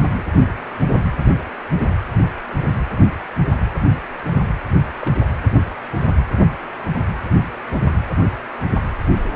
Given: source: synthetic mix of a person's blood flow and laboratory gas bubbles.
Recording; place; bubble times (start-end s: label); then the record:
Doppler ultrasound of blood flow; precordium
2.21-2.32 s: bubbles
4.96-5.12 s: bubbles
6.78-6.85 s: bubbles
From the record:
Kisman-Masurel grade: 121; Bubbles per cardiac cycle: 1 to 2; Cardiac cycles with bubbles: 10 to 50%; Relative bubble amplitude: barely perceptible (0.100 to 0.250); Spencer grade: 2 (many but less than half of the cardiac periods contain bubble signals, singularly or in groups); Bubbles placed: anywhere in the cardiac cycle